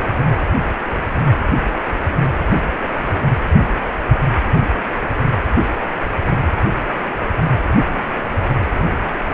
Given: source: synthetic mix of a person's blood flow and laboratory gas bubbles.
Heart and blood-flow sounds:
Doppler ultrasound of blood flow; precordium
7.67-7.78 s: bubbles
7.87-8.02 s: bubbles
From the record:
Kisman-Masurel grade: 211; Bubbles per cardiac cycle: several, 3 to 8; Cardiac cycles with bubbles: 1 to 10%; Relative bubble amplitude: barely perceptible (0.100 to 0.250); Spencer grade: 1 (occasional bubble signal discernible with the cardiac motion signal, with majority of cardiac periods free of bubbles); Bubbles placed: anywhere in the cardiac cycle

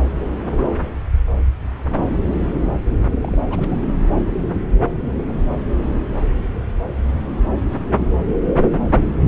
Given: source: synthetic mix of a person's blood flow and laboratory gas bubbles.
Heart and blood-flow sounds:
Doppler ultrasound of blood flow; subclavian vein
3.23-3.82 s: bubbles
From the record:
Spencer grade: 2 (many but less than half of the cardiac periods contain bubble signals, singularly or in groups); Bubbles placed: anywhere in the cardiac cycle

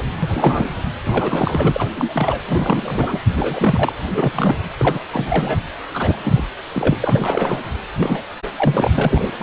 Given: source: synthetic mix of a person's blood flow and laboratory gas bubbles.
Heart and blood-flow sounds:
Doppler ultrasound of blood flow; precordium
0.23-0.70 s: bubbles
1.04-1.90 s: bubbles
1.96-2.42 s: bubbles
2.48-3.22 s: bubbles
3.35-3.92 s: bubbles
4.13-4.56 s: bubbles
4.79-4.99 s: bubbles
5.11-5.62 s: bubbles
5.93-6.50 s: bubbles
6.72-6.96 s: bubbles
7.02-7.61 s: bubbles
7.97-8.24 s: bubbles
8.57-8.90 s: bubbles
8.95-9.32 s: bubbles
9.38-9.43 s: bubbles
From the record:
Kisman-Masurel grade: 342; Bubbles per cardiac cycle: rolling drumbeat, 9 or more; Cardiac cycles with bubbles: 100%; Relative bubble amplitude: moderate (0.250 to 0.450); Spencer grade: 3 (all of the cardiac periods contain showers or single bubble signals, but not dominating or overriding the cardiac motion signals); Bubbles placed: anywhere in the cardiac cycle

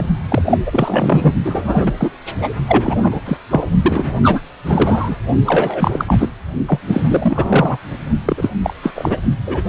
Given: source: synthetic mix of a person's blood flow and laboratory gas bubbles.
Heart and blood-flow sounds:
Doppler ultrasound of blood flow; precordium
0.00-0.05 s: bubbles
0.29-0.42 s: bubbles
0.45-0.58 s: bubbles
0.66-1.33 s: bubbles
1.44-1.92 s: bubbles
1.97-2.10 s: bubbles
2.42-2.50 s: bubbles
2.67-3.00 s: bubbles
3.03-3.21 s: bubbles
3.26-3.37 s: bubbles
3.50-3.67 s: bubbles
3.83-4.13 s: bubbles
4.23-4.42 s: bubbles
4.66-5.17 s: bubbles
5.46-6.29 s: bubbles
6.67-6.79 s: bubbles
6.88-7.01 s: bubbles
7.08-7.78 s: bubbles
8.25-8.51 s: bubbles
8.63-8.73 s: bubbles
8.82-9.17 s: bubbles
9.46-9.62 s: bubbles
From the record:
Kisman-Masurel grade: 343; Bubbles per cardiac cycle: rolling drumbeat, 9 or more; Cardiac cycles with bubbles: 100%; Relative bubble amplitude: loud (0.450 to 0.775); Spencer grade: 3 (all of the cardiac periods contain showers or single bubble signals, but not dominating or overriding the cardiac motion signals); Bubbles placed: only in the low amplitude regions of the cardiac cycle

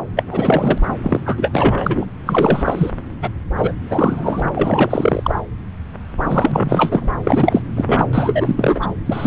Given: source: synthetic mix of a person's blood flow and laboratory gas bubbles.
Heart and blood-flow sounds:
Doppler ultrasound of blood flow; subclavian vein
0.16-0.23 s: bubbles
0.28-0.78 s: bubbles
1.02-1.21 s: bubbles
1.26-2.06 s: bubbles
2.26-2.91 s: bubbles
3.22-3.29 s: bubbles
3.57-3.75 s: bubbles
3.84-4.40 s: bubbles
4.55-5.39 s: bubbles
6.22-7.08 s: bubbles
7.23-7.61 s: bubbles
7.75-8.05 s: bubbles
8.13-8.89 s: bubbles
9.05-9.27 s: bubbles
From the record:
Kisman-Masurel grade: 333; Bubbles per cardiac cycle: rolling drumbeat, 9 or more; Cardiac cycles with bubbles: 50 to 99%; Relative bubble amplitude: loud (0.450 to 0.775); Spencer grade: 3 (all of the cardiac periods contain showers or single bubble signals, but not dominating or overriding the cardiac motion signals); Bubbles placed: anywhere in the cardiac cycle

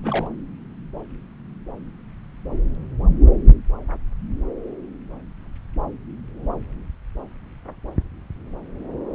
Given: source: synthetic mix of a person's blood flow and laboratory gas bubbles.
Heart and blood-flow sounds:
Doppler ultrasound of blood flow; subclavian vein
0.03-0.28 s: bubbles
From the record:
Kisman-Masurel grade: 111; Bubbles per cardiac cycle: 1 to 2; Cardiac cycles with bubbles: 1 to 10%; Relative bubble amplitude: barely perceptible (0.100 to 0.250); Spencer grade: 1 (occasional bubble signal discernible with the cardiac motion signal, with majority of cardiac periods free of bubbles); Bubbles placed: anywhere in the cardiac cycle

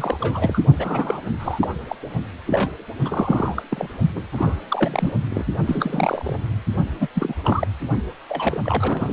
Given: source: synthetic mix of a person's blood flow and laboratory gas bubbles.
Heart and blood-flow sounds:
Doppler ultrasound of blood flow; precordium
0.00-0.61 s: bubbles
0.77-1.22 s: bubbles
1.39-1.68 s: bubbles
1.88-1.95 s: bubbles
2.46-2.70 s: bubbles
3.04-3.62 s: bubbles
3.70-3.88 s: bubbles
4.15-4.22 s: bubbles
4.33-4.61 s: bubbles
4.68-5.13 s: bubbles
5.30-5.45 s: bubbles
5.66-6.36 s: bubbles
7.00-7.08 s: bubbles
7.15-7.34 s: bubbles
7.44-7.68 s: bubbles
8.29-9.13 s: bubbles
From the record:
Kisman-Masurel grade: 342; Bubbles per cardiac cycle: rolling drumbeat, 9 or more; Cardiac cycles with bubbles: 100%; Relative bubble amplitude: moderate (0.250 to 0.450); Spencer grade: 3 (all of the cardiac periods contain showers or single bubble signals, but not dominating or overriding the cardiac motion signals); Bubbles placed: only in the low amplitude regions of the cardiac cycle

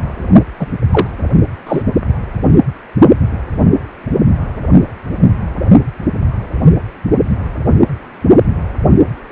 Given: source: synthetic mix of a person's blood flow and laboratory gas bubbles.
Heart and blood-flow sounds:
Doppler ultrasound of blood flow; precordium
0.58-0.67 s: bubbles
0.91-1.07 s: bubbles
1.67-1.83 s: bubbles
From the record:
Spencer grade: 1 (occasional bubble signal discernible with the cardiac motion signal, with majority of cardiac periods free of bubbles); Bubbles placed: only in the low amplitude regions of the cardiac cycle

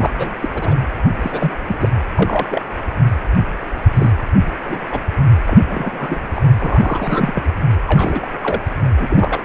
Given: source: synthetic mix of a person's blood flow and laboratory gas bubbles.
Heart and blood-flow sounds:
Doppler ultrasound of blood flow; precordium
0.00-0.12 s: bubbles
0.18-0.35 s: bubbles
0.40-0.48 s: bubbles
0.54-0.77 s: bubbles
1.22-1.52 s: bubbles
1.67-1.89 s: bubbles
2.15-2.62 s: bubbles
3.93-4.12 s: bubbles
4.66-4.81 s: bubbles
4.92-5.00 s: bubbles
5.46-5.64 s: bubbles
5.67-6.18 s: bubbles
6.34-6.42 s: bubbles
6.59-7.32 s: bubbles
7.34-7.43 s: bubbles
7.87-8.28 s: bubbles
8.43-8.61 s: bubbles
8.98-9.44 s: bubbles
From the record:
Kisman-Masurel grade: 242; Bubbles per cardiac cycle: several, 3 to 8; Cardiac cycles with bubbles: 100%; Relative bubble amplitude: moderate (0.250 to 0.450); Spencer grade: 3 (all of the cardiac periods contain showers or single bubble signals, but not dominating or overriding the cardiac motion signals); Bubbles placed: anywhere in the cardiac cycle

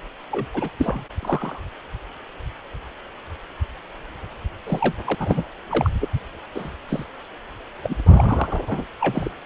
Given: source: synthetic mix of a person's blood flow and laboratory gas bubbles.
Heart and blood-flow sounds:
Doppler ultrasound of blood flow; precordium
0.30-0.45 s: bubbles
0.54-0.69 s: bubbles
0.78-1.04 s: bubbles
1.20-1.61 s: bubbles
4.66-4.96 s: bubbles
5.06-5.15 s: bubbles
5.19-5.43 s: bubbles
5.70-5.90 s: bubbles
6.01-6.09 s: bubbles
6.54-6.71 s: bubbles
6.88-7.04 s: bubbles
7.83-7.97 s: bubbles
8.06-8.83 s: bubbles
9.01-9.29 s: bubbles
From the record:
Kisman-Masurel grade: 232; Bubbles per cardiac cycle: several, 3 to 8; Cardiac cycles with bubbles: 50 to 99%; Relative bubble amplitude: moderate (0.250 to 0.450); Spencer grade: 3 (all of the cardiac periods contain showers or single bubble signals, but not dominating or overriding the cardiac motion signals); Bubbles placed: anywhere in the cardiac cycle

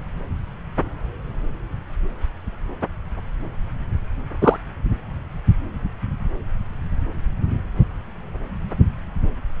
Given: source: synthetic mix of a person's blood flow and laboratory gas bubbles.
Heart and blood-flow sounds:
Doppler ultrasound of blood flow; subclavian vein
4.42-4.57 s: bubbles
From the record:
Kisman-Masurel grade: 113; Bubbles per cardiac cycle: 1 to 2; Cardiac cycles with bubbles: 1 to 10%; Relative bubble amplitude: loud (0.450 to 0.775); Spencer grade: 1 (occasional bubble signal discernible with the cardiac motion signal, with majority of cardiac periods free of bubbles); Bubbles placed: anywhere in the cardiac cycle

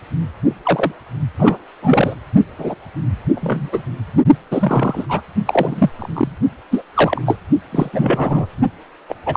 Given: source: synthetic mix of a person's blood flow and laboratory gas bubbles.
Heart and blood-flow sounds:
Doppler ultrasound of blood flow; precordium
0.63-0.92 s: bubbles
1.38-1.58 s: bubbles
1.82-2.15 s: bubbles
2.58-2.75 s: bubbles
3.35-3.70 s: bubbles
3.72-3.82 s: bubbles
4.50-5.06 s: bubbles
5.09-5.21 s: bubbles
5.46-5.90 s: bubbles
5.96-6.33 s: bubbles
6.71-6.82 s: bubbles
6.94-7.21 s: bubbles
7.26-7.37 s: bubbles
7.71-7.89 s: bubbles
7.93-8.46 s: bubbles
9.09-9.15 s: bubbles
9.26-9.37 s: bubbles
From the record:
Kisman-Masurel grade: 243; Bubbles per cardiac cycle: several, 3 to 8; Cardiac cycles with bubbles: 100%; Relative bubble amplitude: loud (0.450 to 0.775); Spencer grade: 3 (all of the cardiac periods contain showers or single bubble signals, but not dominating or overriding the cardiac motion signals); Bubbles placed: only in the low amplitude regions of the cardiac cycle

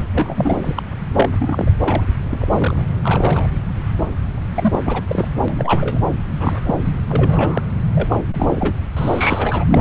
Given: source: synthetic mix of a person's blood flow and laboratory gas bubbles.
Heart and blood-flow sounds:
Doppler ultrasound of blood flow; subclavian vein
0.00-0.06 s: bubbles
0.14-0.82 s: bubbles
1.15-1.29 s: bubbles
1.39-1.71 s: bubbles
1.80-2.03 s: bubbles
2.30-2.84 s: bubbles
3.03-3.47 s: bubbles
3.99-4.09 s: bubbles
4.54-4.79 s: bubbles
4.85-5.02 s: bubbles
5.09-5.28 s: bubbles
5.48-6.05 s: bubbles
6.38-6.60 s: bubbles
6.63-6.75 s: bubbles
7.08-7.62 s: bubbles
7.94-8.24 s: bubbles
8.34-8.76 s: bubbles
8.97-9.65 s: bubbles
9.70-9.81 s: bubbles
From the record:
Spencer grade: 3 (all of the cardiac periods contain showers or single bubble signals, but not dominating or overriding the cardiac motion signals); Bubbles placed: anywhere in the cardiac cycle

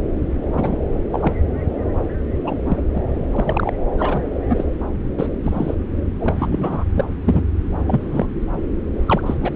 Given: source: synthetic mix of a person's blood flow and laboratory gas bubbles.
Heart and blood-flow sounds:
Doppler ultrasound of blood flow; subclavian vein
0.55-0.78 s: bubbles
1.12-1.33 s: bubbles
2.36-2.82 s: bubbles
2.94-3.01 s: bubbles
3.33-3.73 s: bubbles
3.98-4.22 s: bubbles
4.49-4.64 s: bubbles
5.18-5.26 s: bubbles
5.43-5.75 s: bubbles
6.18-6.89 s: bubbles
6.96-7.04 s: bubbles
7.24-7.42 s: bubbles
7.87-8.26 s: bubbles
9.06-9.21 s: bubbles
9.25-9.34 s: bubbles
9.40-9.51 s: bubbles
From the record:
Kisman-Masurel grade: 242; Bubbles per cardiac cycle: several, 3 to 8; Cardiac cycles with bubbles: 100%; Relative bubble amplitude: moderate (0.250 to 0.450); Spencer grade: 3 (all of the cardiac periods contain showers or single bubble signals, but not dominating or overriding the cardiac motion signals); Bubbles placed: anywhere in the cardiac cycle

